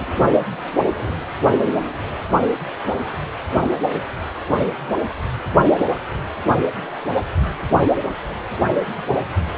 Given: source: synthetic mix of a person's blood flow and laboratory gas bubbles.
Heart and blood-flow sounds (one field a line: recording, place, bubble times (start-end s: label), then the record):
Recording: Doppler ultrasound of blood flow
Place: precordium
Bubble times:
no bubbles
From the record:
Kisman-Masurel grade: 000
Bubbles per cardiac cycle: 0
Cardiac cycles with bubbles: 0%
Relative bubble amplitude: no bubbles discernible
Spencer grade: 0 (complete lack of bubble signals)